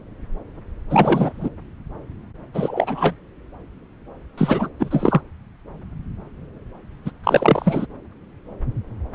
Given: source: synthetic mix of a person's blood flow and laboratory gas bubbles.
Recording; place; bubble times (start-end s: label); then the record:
Doppler ultrasound of blood flow; subclavian vein
0.90-1.50 s: bubbles
2.54-3.15 s: bubbles
4.38-4.69 s: bubbles
4.79-5.21 s: bubbles
7.05-7.11 s: bubbles
7.24-7.86 s: bubbles
From the record:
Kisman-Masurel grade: 233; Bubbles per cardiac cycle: several, 3 to 8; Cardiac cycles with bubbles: 50 to 99%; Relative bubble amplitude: loud (0.450 to 0.775); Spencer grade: 3 (all of the cardiac periods contain showers or single bubble signals, but not dominating or overriding the cardiac motion signals); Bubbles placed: anywhere in the cardiac cycle